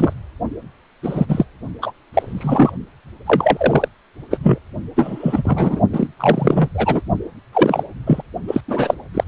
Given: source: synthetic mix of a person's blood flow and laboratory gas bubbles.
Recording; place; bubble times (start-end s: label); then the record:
Doppler ultrasound of blood flow; precordium
0.00-0.13 s: bubbles
1.02-1.44 s: bubbles
1.82-1.93 s: bubbles
2.14-2.72 s: bubbles
3.26-3.88 s: bubbles
4.30-4.38 s: bubbles
4.42-4.58 s: bubbles
4.96-5.80 s: bubbles
5.92-6.07 s: bubbles
6.18-6.68 s: bubbles
6.75-7.01 s: bubbles
7.53-7.83 s: bubbles
8.06-8.22 s: bubbles
8.47-8.61 s: bubbles
8.68-8.94 s: bubbles
9.14-9.24 s: bubbles
From the record:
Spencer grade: 3 (all of the cardiac periods contain showers or single bubble signals, but not dominating or overriding the cardiac motion signals); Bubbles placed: only in the low amplitude regions of the cardiac cycle